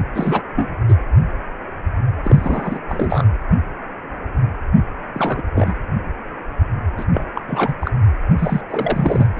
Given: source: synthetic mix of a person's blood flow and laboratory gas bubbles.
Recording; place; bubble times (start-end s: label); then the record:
Doppler ultrasound of blood flow; precordium
0.15-0.42 s: bubbles
0.55-0.75 s: bubbles
0.89-0.95 s: bubbles
2.24-2.79 s: bubbles
2.88-3.26 s: bubbles
5.14-5.42 s: bubbles
5.55-5.74 s: bubbles
6.97-7.05 s: bubbles
7.13-7.25 s: bubbles
7.35-7.42 s: bubbles
7.48-7.74 s: bubbles
7.80-7.91 s: bubbles
8.38-8.62 s: bubbles
8.70-9.27 s: bubbles
9.37-9.40 s: bubbles
From the record:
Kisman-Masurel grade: 232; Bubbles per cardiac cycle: several, 3 to 8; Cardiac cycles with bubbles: 50 to 99%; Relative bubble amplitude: moderate (0.250 to 0.450); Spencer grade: 3 (all of the cardiac periods contain showers or single bubble signals, but not dominating or overriding the cardiac motion signals); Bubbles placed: anywhere in the cardiac cycle